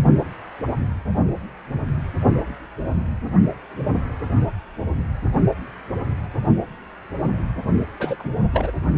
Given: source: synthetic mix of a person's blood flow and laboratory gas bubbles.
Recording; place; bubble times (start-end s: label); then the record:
Doppler ultrasound of blood flow; precordium
7.99-8.16 s: bubbles
8.19-8.29 s: bubbles
8.51-8.71 s: bubbles
From the record:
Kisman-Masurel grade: 211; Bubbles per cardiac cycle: several, 3 to 8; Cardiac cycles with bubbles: 1 to 10%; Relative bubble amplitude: barely perceptible (0.100 to 0.250); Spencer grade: 1 (occasional bubble signal discernible with the cardiac motion signal, with majority of cardiac periods free of bubbles); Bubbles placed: only in the low amplitude regions of the cardiac cycle